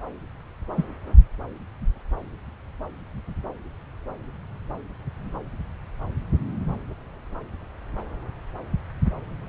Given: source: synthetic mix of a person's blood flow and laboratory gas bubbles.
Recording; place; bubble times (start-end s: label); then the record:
Doppler ultrasound of blood flow; subclavian vein
0.76-0.84 s: bubbles
From the record:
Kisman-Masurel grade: 112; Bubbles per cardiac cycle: 1 to 2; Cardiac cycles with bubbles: 1 to 10%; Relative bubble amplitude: moderate (0.250 to 0.450); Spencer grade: 1 (occasional bubble signal discernible with the cardiac motion signal, with majority of cardiac periods free of bubbles); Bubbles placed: anywhere in the cardiac cycle